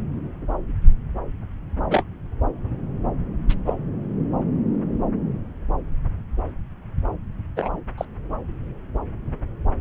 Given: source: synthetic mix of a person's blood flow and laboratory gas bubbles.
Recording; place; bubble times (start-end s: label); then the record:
Doppler ultrasound of blood flow; subclavian vein
1.90-2.04 s: bubbles
3.49-3.55 s: bubbles
3.66-3.74 s: bubbles
7.56-7.70 s: bubbles
7.97-8.05 s: bubbles
From the record:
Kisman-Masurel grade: 122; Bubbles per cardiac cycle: 1 to 2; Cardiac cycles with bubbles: 10 to 50%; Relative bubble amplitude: moderate (0.250 to 0.450); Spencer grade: 2 (many but less than half of the cardiac periods contain bubble signals, singularly or in groups); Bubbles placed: anywhere in the cardiac cycle